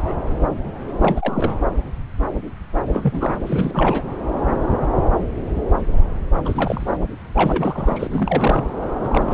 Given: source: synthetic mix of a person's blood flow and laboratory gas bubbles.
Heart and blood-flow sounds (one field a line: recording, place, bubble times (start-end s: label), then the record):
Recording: Doppler ultrasound of blood flow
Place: subclavian vein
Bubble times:
0.00-0.13 s: bubbles
1.02-1.53 s: bubbles
2.92-3.37 s: bubbles
3.46-4.03 s: bubbles
6.45-6.97 s: bubbles
7.35-8.07 s: bubbles
8.10-8.69 s: bubbles
9.03-9.08 s: bubbles
9.12-9.34 s: bubbles
From the record:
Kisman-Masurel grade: 332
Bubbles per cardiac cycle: rolling drumbeat, 9 or more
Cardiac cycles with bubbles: 50 to 99%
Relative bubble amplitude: moderate (0.250 to 0.450)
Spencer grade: 3 (all of the cardiac periods contain showers or single bubble signals, but not dominating or overriding the cardiac motion signals)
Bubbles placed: anywhere in the cardiac cycle